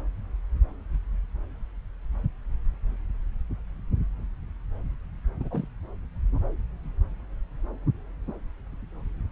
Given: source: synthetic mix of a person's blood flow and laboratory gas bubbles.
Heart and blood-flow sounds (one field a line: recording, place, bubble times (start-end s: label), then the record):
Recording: Doppler ultrasound of blood flow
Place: subclavian vein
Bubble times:
5.40-5.67 s: bubbles
From the record:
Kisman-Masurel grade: 211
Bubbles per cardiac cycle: several, 3 to 8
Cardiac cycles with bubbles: 1 to 10%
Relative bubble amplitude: barely perceptible (0.100 to 0.250)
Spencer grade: 1 (occasional bubble signal discernible with the cardiac motion signal, with majority of cardiac periods free of bubbles)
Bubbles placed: anywhere in the cardiac cycle